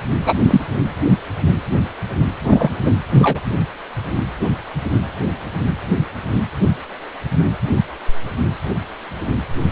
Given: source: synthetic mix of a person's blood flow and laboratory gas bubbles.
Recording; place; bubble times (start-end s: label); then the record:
Doppler ultrasound of blood flow; precordium
0.26-0.34 s: bubbles
0.39-0.61 s: bubbles
2.48-2.69 s: bubbles
2.85-2.90 s: bubbles
3.10-3.40 s: bubbles
From the record:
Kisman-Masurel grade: 123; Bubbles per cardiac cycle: 1 to 2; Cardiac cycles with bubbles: 10 to 50%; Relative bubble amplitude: loud (0.450 to 0.775); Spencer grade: 2 (many but less than half of the cardiac periods contain bubble signals, singularly or in groups); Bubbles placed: anywhere in the cardiac cycle